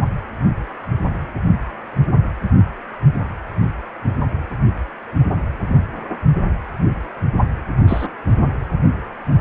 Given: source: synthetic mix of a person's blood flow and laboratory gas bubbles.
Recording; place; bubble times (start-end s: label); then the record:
Doppler ultrasound of blood flow; precordium
7.88-8.06 s: bubbles
From the record:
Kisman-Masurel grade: 112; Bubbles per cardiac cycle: 1 to 2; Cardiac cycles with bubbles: 1 to 10%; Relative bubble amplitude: moderate (0.250 to 0.450); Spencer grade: 1 (occasional bubble signal discernible with the cardiac motion signal, with majority of cardiac periods free of bubbles); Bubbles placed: anywhere in the cardiac cycle